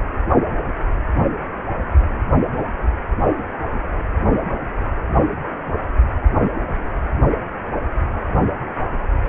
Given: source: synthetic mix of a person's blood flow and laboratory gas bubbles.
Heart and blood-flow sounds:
Doppler ultrasound of blood flow; precordium
3.22-3.47 s: bubbles
From the record:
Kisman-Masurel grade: 121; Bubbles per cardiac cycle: 1 to 2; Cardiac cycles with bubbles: 10 to 50%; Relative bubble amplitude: barely perceptible (0.100 to 0.250); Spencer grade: 2 (many but less than half of the cardiac periods contain bubble signals, singularly or in groups); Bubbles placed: only in the low amplitude regions of the cardiac cycle

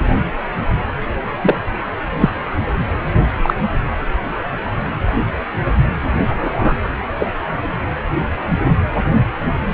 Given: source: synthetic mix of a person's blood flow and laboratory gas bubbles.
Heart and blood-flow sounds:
Doppler ultrasound of blood flow; precordium
1.42-1.56 s: bubbles
2.20-2.29 s: bubbles
3.42-3.54 s: bubbles
6.28-6.75 s: bubbles
7.19-7.27 s: bubbles
7.84-7.87 s: bubbles
From the record:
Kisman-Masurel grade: 123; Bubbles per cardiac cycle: 1 to 2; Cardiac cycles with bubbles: 10 to 50%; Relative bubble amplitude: loud (0.450 to 0.775); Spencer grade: 2 (many but less than half of the cardiac periods contain bubble signals, singularly or in groups); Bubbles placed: anywhere in the cardiac cycle

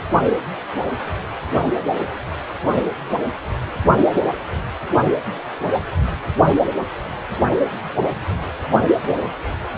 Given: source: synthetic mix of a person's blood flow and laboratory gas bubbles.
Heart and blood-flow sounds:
Doppler ultrasound of blood flow; precordium
no bubbles
From the record:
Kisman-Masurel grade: 000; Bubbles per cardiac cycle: 0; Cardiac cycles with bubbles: 0%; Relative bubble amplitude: no bubbles discernible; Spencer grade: 0 (complete lack of bubble signals)

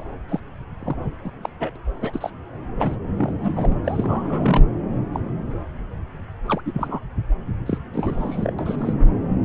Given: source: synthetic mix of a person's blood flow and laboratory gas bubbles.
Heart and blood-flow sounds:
Doppler ultrasound of blood flow; subclavian vein
0.00-0.04 s: bubbles
0.29-0.40 s: bubbles
0.81-0.95 s: bubbles
1.24-1.30 s: bubbles
1.43-1.49 s: bubbles
1.59-1.71 s: bubbles
1.76-1.78 s: bubbles
2.00-2.30 s: bubbles
2.78-2.96 s: bubbles
3.17-3.76 s: bubbles
3.84-4.64 s: bubbles
5.14-5.20 s: bubbles
6.48-6.62 s: bubbles
6.66-7.00 s: bubbles
7.66-7.79 s: bubbles
7.93-8.53 s: bubbles
8.58-8.93 s: bubbles
From the record:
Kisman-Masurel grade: 242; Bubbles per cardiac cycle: several, 3 to 8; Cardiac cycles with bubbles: 100%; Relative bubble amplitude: moderate (0.250 to 0.450); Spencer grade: 3 (all of the cardiac periods contain showers or single bubble signals, but not dominating or overriding the cardiac motion signals); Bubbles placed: anywhere in the cardiac cycle

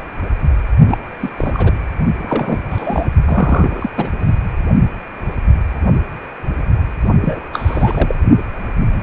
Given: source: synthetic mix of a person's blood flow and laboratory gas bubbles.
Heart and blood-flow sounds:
Doppler ultrasound of blood flow; precordium
0.88-0.98 s: bubbles
1.20-1.30 s: bubbles
1.36-1.72 s: bubbles
2.17-2.59 s: bubbles
2.70-3.07 s: bubbles
3.25-3.90 s: bubbles
3.96-4.12 s: bubbles
7.21-7.41 s: bubbles
7.53-8.14 s: bubbles
From the record:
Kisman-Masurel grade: 332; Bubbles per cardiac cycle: rolling drumbeat, 9 or more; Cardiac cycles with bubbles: 50 to 99%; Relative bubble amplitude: moderate (0.250 to 0.450); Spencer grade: 3 (all of the cardiac periods contain showers or single bubble signals, but not dominating or overriding the cardiac motion signals); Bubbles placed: only in the low amplitude regions of the cardiac cycle

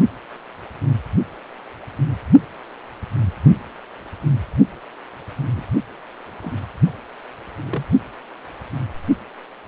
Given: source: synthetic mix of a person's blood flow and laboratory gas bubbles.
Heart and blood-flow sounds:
Doppler ultrasound of blood flow; precordium
5.51-5.63 s: bubbles
6.42-6.54 s: bubbles
7.67-7.83 s: bubbles
From the record:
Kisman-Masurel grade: 121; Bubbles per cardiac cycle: 1 to 2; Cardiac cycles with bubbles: 10 to 50%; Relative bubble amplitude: barely perceptible (0.100 to 0.250); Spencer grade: 2 (many but less than half of the cardiac periods contain bubble signals, singularly or in groups); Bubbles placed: only in the low amplitude regions of the cardiac cycle

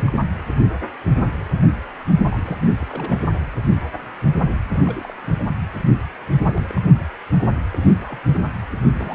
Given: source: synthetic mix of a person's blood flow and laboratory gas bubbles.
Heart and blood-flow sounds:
Doppler ultrasound of blood flow; precordium
0.00-0.14 s: bubbles
2.29-2.72 s: bubbles
2.81-2.85 s: bubbles
2.88-3.27 s: bubbles
4.70-5.15 s: bubbles
5.21-5.44 s: bubbles
6.45-6.81 s: bubbles
7.72-8.20 s: bubbles
8.28-8.41 s: bubbles
8.90-9.15 s: bubbles
From the record:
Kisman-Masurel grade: 221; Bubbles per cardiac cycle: several, 3 to 8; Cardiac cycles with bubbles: 10 to 50%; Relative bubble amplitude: barely perceptible (0.100 to 0.250); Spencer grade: 2 (many but less than half of the cardiac periods contain bubble signals, singularly or in groups); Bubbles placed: anywhere in the cardiac cycle

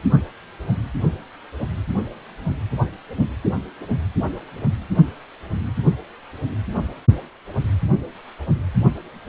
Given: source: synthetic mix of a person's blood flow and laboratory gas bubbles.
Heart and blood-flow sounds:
Doppler ultrasound of blood flow; precordium
no bubbles
From the record:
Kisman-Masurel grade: 000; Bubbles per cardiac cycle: 0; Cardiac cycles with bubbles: 0%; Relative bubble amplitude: no bubbles discernible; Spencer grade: 0 (complete lack of bubble signals)

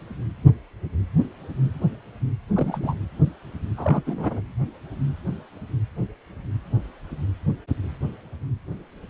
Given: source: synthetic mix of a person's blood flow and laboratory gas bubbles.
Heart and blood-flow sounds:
Doppler ultrasound of blood flow; precordium
2.48-2.95 s: bubbles
3.77-4.02 s: bubbles
4.05-4.42 s: bubbles
From the record:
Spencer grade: 2 (many but less than half of the cardiac periods contain bubble signals, singularly or in groups); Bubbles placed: anywhere in the cardiac cycle

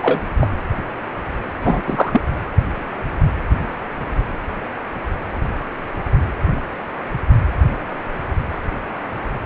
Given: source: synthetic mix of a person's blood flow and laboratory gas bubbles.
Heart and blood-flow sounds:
Doppler ultrasound of blood flow; precordium
0.00-0.20 s: bubbles
0.40-0.48 s: bubbles
1.61-1.82 s: bubbles
1.86-2.21 s: bubbles
From the record:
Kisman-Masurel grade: 223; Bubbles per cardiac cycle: several, 3 to 8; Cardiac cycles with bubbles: 10 to 50%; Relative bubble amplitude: loud (0.450 to 0.775); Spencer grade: 2 (many but less than half of the cardiac periods contain bubble signals, singularly or in groups); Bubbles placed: anywhere in the cardiac cycle

